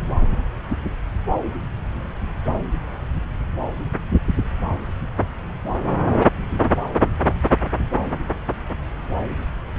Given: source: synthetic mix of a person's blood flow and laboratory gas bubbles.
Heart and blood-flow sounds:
Doppler ultrasound of blood flow; subclavian vein
no bubbles
From the record:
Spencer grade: 0 (complete lack of bubble signals)

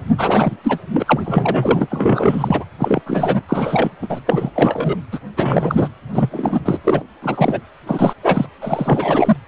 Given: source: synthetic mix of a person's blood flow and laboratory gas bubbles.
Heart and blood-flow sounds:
Doppler ultrasound of blood flow; precordium
0.18-0.56 s: bubbles
0.63-0.78 s: bubbles
0.92-1.87 s: bubbles
1.90-2.65 s: bubbles
2.79-3.02 s: bubbles
3.06-3.43 s: bubbles
3.48-3.91 s: bubbles
4.01-4.20 s: bubbles
4.25-4.50 s: bubbles
4.55-4.96 s: bubbles
5.12-5.19 s: bubbles
5.37-5.88 s: bubbles
6.13-6.60 s: bubbles
6.64-6.79 s: bubbles
6.83-7.03 s: bubbles
7.22-7.60 s: bubbles
7.87-8.14 s: bubbles
8.23-8.46 s: bubbles
8.61-9.37 s: bubbles
From the record:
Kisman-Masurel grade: 333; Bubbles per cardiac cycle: rolling drumbeat, 9 or more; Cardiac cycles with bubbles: 50 to 99%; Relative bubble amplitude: loud (0.450 to 0.775); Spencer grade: 3 (all of the cardiac periods contain showers or single bubble signals, but not dominating or overriding the cardiac motion signals); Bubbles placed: anywhere in the cardiac cycle

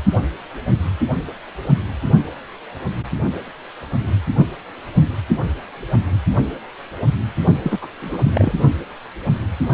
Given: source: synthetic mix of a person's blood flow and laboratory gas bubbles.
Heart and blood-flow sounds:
Doppler ultrasound of blood flow; precordium
7.63-7.78 s: bubbles
7.82-7.88 s: bubbles
8.01-8.18 s: bubbles
8.24-8.53 s: bubbles
From the record:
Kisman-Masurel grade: 212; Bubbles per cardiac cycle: several, 3 to 8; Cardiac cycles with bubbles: 1 to 10%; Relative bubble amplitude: moderate (0.250 to 0.450); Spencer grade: 1 (occasional bubble signal discernible with the cardiac motion signal, with majority of cardiac periods free of bubbles); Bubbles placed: anywhere in the cardiac cycle

